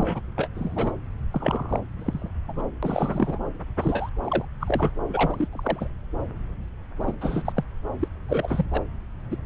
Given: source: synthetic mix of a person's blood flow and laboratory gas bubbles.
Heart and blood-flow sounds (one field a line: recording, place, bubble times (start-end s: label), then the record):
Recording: Doppler ultrasound of blood flow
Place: subclavian vein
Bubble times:
0.00-0.48 s: bubbles
0.55-0.93 s: bubbles
1.32-1.79 s: bubbles
1.96-2.30 s: bubbles
2.48-2.62 s: bubbles
2.83-3.38 s: bubbles
3.80-4.09 s: bubbles
4.24-4.45 s: bubbles
4.61-4.91 s: bubbles
5.08-5.49 s: bubbles
5.51-5.88 s: bubbles
7.00-7.16 s: bubbles
7.21-7.53 s: bubbles
7.56-7.63 s: bubbles
7.99-8.08 s: bubbles
8.29-8.66 s: bubbles
8.71-8.84 s: bubbles
9.31-9.37 s: bubbles
From the record:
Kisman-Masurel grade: 232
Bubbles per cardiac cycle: several, 3 to 8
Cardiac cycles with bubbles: 50 to 99%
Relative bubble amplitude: moderate (0.250 to 0.450)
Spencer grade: 3 (all of the cardiac periods contain showers or single bubble signals, but not dominating or overriding the cardiac motion signals)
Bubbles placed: anywhere in the cardiac cycle